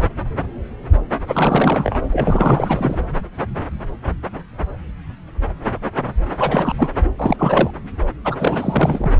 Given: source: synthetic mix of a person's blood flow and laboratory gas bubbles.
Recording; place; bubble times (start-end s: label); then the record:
Doppler ultrasound of blood flow; subclavian vein
1.26-2.00 s: bubbles
2.11-3.01 s: bubbles
6.38-6.73 s: bubbles
6.78-6.91 s: bubbles
7.18-7.71 s: bubbles
8.24-9.12 s: bubbles
From the record:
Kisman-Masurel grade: 332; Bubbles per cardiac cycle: rolling drumbeat, 9 or more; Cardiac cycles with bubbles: 50 to 99%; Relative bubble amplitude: moderate (0.250 to 0.450); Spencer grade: 3 (all of the cardiac periods contain showers or single bubble signals, but not dominating or overriding the cardiac motion signals); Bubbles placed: anywhere in the cardiac cycle